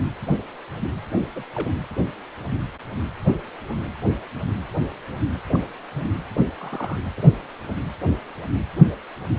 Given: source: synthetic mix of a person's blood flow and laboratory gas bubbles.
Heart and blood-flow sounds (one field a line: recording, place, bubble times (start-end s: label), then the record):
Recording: Doppler ultrasound of blood flow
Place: precordium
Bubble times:
1.35-1.43 s: bubbles
1.54-1.71 s: bubbles
5.51-5.65 s: bubbles
5.92-6.11 s: bubbles
6.58-6.99 s: bubbles
7.17-7.21 s: bubbles
From the record:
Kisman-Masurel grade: 121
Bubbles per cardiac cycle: 1 to 2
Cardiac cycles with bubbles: 10 to 50%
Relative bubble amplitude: barely perceptible (0.100 to 0.250)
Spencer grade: 2 (many but less than half of the cardiac periods contain bubble signals, singularly or in groups)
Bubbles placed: anywhere in the cardiac cycle